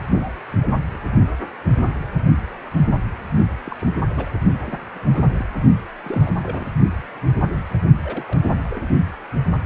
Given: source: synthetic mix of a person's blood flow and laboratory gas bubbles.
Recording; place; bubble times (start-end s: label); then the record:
Doppler ultrasound of blood flow; precordium
0.09-0.32 s: bubbles
0.51-0.79 s: bubbles
0.91-1.00 s: bubbles
3.65-3.93 s: bubbles
4.10-4.31 s: bubbles
4.64-4.79 s: bubbles
4.92-5.22 s: bubbles
5.35-5.46 s: bubbles
6.03-6.38 s: bubbles
6.42-6.67 s: bubbles
8.05-8.38 s: bubbles
8.47-8.81 s: bubbles
From the record:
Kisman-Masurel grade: 221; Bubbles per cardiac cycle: several, 3 to 8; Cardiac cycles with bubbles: 10 to 50%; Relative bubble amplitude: barely perceptible (0.100 to 0.250); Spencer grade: 2 (many but less than half of the cardiac periods contain bubble signals, singularly or in groups); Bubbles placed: only in the low amplitude regions of the cardiac cycle